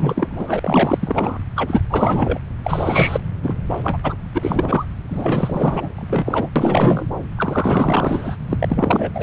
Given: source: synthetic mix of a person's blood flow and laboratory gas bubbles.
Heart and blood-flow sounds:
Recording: Doppler ultrasound of blood flow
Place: subclavian vein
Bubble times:
0.00-1.39 s: bubbles
1.55-1.82 s: bubbles
1.90-2.39 s: bubbles
2.64-3.20 s: bubbles
3.42-3.57 s: bubbles
3.69-3.99 s: bubbles
4.04-4.16 s: bubbles
4.34-4.85 s: bubbles
5.10-6.49 s: bubbles
6.56-7.09 s: bubbles
7.38-8.36 s: bubbles
8.49-9.11 s: bubbles
9.14-9.23 s: bubbles
From the record:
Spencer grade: 4 (maximum detectable bubble signal sounding continuously throughout systole and diastole of every cardiac period, and overriding the amplitude of the normal cardiac signals)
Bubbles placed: anywhere in the cardiac cycle

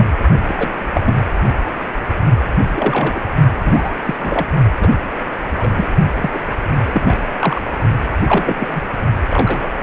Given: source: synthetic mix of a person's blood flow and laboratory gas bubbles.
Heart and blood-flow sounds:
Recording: Doppler ultrasound of blood flow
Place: precordium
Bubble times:
0.00-0.05 s: bubbles
0.46-0.72 s: bubbles
0.94-1.01 s: bubbles
1.06-1.13 s: bubbles
2.74-3.21 s: bubbles
3.57-3.95 s: bubbles
4.04-4.46 s: bubbles
4.80-4.88 s: bubbles
5.56-5.71 s: bubbles
5.75-5.89 s: bubbles
6.21-6.30 s: bubbles
6.33-6.40 s: bubbles
6.84-7.15 s: bubbles
7.39-7.62 s: bubbles
8.28-8.57 s: bubbles
8.60-8.68 s: bubbles
8.70-8.83 s: bubbles
9.28-9.67 s: bubbles
9.78-9.83 s: bubbles
From the record:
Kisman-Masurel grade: 242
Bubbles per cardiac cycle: several, 3 to 8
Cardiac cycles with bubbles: 100%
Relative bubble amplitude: moderate (0.250 to 0.450)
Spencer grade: 3 (all of the cardiac periods contain showers or single bubble signals, but not dominating or overriding the cardiac motion signals)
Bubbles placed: only in the low amplitude regions of the cardiac cycle

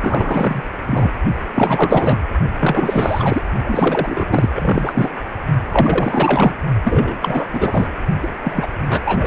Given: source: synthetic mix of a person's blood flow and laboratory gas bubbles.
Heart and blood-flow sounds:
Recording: Doppler ultrasound of blood flow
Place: precordium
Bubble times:
0.01-0.62 s: bubbles
0.86-1.12 s: bubbles
1.54-2.21 s: bubbles
2.60-3.41 s: bubbles
3.64-4.49 s: bubbles
4.52-5.10 s: bubbles
5.68-6.54 s: bubbles
6.84-7.88 s: bubbles
8.22-8.28 s: bubbles
8.43-8.68 s: bubbles
8.89-9.01 s: bubbles
9.04-9.27 s: bubbles
From the record:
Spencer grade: 4 (maximum detectable bubble signal sounding continuously throughout systole and diastole of every cardiac period, and overriding the amplitude of the normal cardiac signals)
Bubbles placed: only in the low amplitude regions of the cardiac cycle

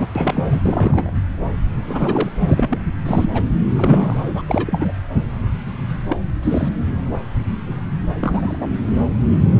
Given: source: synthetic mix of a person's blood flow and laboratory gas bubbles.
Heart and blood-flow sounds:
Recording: Doppler ultrasound of blood flow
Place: subclavian vein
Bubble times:
0.00-0.07 s: bubbles
0.15-0.61 s: bubbles
0.65-1.10 s: bubbles
1.87-2.30 s: bubbles
2.47-2.78 s: bubbles
3.05-3.51 s: bubbles
3.76-4.16 s: bubbles
4.20-4.42 s: bubbles
4.48-4.92 s: bubbles
6.09-6.18 s: bubbles
6.42-6.78 s: bubbles
8.21-8.67 s: bubbles
From the record:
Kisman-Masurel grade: 232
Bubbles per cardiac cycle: several, 3 to 8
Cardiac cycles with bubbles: 50 to 99%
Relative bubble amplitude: moderate (0.250 to 0.450)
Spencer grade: 3 (all of the cardiac periods contain showers or single bubble signals, but not dominating or overriding the cardiac motion signals)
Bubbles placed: anywhere in the cardiac cycle

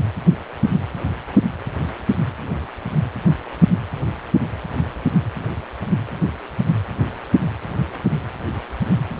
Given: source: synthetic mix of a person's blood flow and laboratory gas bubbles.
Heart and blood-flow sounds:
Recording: Doppler ultrasound of blood flow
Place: precordium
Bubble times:
9.17-9.20 s: bubbles
From the record:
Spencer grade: 1 (occasional bubble signal discernible with the cardiac motion signal, with majority of cardiac periods free of bubbles)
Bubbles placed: anywhere in the cardiac cycle

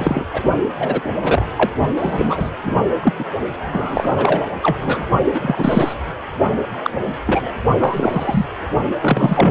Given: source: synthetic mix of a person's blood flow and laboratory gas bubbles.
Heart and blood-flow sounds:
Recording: Doppler ultrasound of blood flow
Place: precordium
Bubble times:
0.00-0.25 s: bubbles
0.33-0.42 s: bubbles
0.79-1.01 s: bubbles
1.22-1.46 s: bubbles
1.57-1.70 s: bubbles
1.97-2.50 s: bubbles
2.65-2.80 s: bubbles
3.02-3.14 s: bubbles
3.19-3.25 s: bubbles
3.72-4.49 s: bubbles
4.62-4.77 s: bubbles
4.80-5.05 s: bubbles
5.33-5.94 s: bubbles
6.83-6.91 s: bubbles
7.27-7.52 s: bubbles
7.79-8.46 s: bubbles
9.01-9.51 s: bubbles
From the record:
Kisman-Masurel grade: 243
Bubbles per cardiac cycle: several, 3 to 8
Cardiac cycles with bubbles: 100%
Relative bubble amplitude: loud (0.450 to 0.775)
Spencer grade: 3 (all of the cardiac periods contain showers or single bubble signals, but not dominating or overriding the cardiac motion signals)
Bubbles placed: only in the low amplitude regions of the cardiac cycle

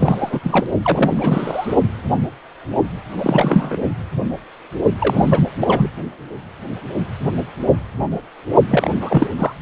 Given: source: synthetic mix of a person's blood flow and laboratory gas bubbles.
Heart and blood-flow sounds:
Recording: Doppler ultrasound of blood flow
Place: precordium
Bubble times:
0.00-0.40 s: bubbles
0.43-0.67 s: bubbles
0.83-1.76 s: bubbles
3.17-3.77 s: bubbles
4.99-5.41 s: bubbles
5.59-5.90 s: bubbles
8.67-9.27 s: bubbles
9.37-9.52 s: bubbles
From the record:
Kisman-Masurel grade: 333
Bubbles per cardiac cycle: rolling drumbeat, 9 or more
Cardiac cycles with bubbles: 50 to 99%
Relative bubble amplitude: loud (0.450 to 0.775)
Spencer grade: 3 (all of the cardiac periods contain showers or single bubble signals, but not dominating or overriding the cardiac motion signals)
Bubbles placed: only in the low amplitude regions of the cardiac cycle

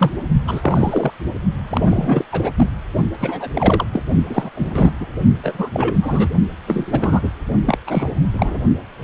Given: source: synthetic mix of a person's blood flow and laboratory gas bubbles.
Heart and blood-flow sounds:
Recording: Doppler ultrasound of blood flow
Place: precordium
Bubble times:
0.00-0.11 s: bubbles
0.47-1.14 s: bubbles
1.68-2.24 s: bubbles
2.31-2.53 s: bubbles
2.55-2.70 s: bubbles
3.20-3.49 s: bubbles
3.53-3.86 s: bubbles
3.93-4.01 s: bubbles
4.29-4.50 s: bubbles
4.55-4.92 s: bubbles
5.00-5.05 s: bubbles
5.43-5.70 s: bubbles
5.73-6.29 s: bubbles
6.67-7.30 s: bubbles
7.65-7.78 s: bubbles
7.87-8.10 s: bubbles
8.33-8.61 s: bubbles
From the record:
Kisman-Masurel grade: 333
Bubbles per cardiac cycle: rolling drumbeat, 9 or more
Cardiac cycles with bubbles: 50 to 99%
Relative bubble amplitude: loud (0.450 to 0.775)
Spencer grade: 3 (all of the cardiac periods contain showers or single bubble signals, but not dominating or overriding the cardiac motion signals)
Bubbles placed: only in the low amplitude regions of the cardiac cycle

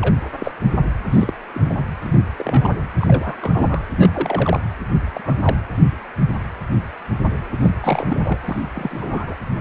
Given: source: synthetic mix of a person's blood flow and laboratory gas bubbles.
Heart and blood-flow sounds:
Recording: Doppler ultrasound of blood flow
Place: precordium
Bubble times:
0.01-0.15 s: bubbles
0.39-0.52 s: bubbles
1.11-1.31 s: bubbles
1.53-1.84 s: bubbles
2.03-2.20 s: bubbles
2.37-2.74 s: bubbles
2.98-3.85 s: bubbles
3.96-4.09 s: bubbles
4.12-4.60 s: bubbles
5.13-5.36 s: bubbles
5.42-5.55 s: bubbles
7.60-7.71 s: bubbles
7.81-8.38 s: bubbles
8.46-8.63 s: bubbles
8.73-9.36 s: bubbles
From the record:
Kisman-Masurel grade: 232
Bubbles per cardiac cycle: several, 3 to 8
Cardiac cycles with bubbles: 50 to 99%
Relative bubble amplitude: moderate (0.250 to 0.450)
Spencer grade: 3 (all of the cardiac periods contain showers or single bubble signals, but not dominating or overriding the cardiac motion signals)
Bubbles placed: anywhere in the cardiac cycle

